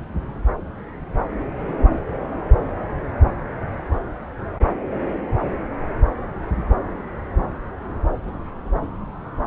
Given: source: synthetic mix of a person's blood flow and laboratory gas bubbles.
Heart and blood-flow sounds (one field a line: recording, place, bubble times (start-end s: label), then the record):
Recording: Doppler ultrasound of blood flow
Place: subclavian vein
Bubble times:
no bubbles
From the record:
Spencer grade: 0 (complete lack of bubble signals)